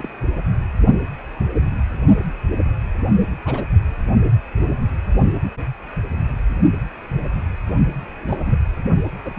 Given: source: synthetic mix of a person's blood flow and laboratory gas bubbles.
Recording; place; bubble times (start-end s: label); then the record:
Doppler ultrasound of blood flow; precordium
0.00-0.09 s: bubbles
3.45-3.64 s: bubbles
8.19-8.55 s: bubbles
9.24-9.33 s: bubbles
9.36-9.39 s: bubbles
From the record:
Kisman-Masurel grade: 121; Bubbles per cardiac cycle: 1 to 2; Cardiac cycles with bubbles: 10 to 50%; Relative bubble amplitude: barely perceptible (0.100 to 0.250); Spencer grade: 2 (many but less than half of the cardiac periods contain bubble signals, singularly or in groups); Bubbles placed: only in the low amplitude regions of the cardiac cycle